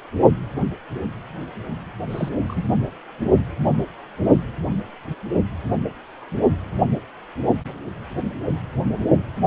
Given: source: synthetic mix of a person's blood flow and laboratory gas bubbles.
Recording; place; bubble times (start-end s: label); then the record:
Doppler ultrasound of blood flow; precordium
2.10-2.29 s: bubbles
2.47-2.67 s: bubbles
From the record:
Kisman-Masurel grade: 122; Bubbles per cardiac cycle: 1 to 2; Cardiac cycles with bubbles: 10 to 50%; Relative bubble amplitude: moderate (0.250 to 0.450); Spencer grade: 2 (many but less than half of the cardiac periods contain bubble signals, singularly or in groups); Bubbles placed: only in the low amplitude regions of the cardiac cycle